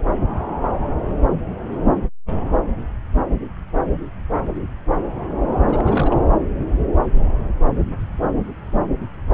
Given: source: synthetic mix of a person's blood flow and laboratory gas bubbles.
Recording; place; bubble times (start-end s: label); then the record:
Doppler ultrasound of blood flow; subclavian vein
5.67-6.17 s: bubbles
From the record:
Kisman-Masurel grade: 211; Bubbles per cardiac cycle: several, 3 to 8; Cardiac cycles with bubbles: 1 to 10%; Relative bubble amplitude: barely perceptible (0.100 to 0.250); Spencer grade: 1 (occasional bubble signal discernible with the cardiac motion signal, with majority of cardiac periods free of bubbles); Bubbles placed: anywhere in the cardiac cycle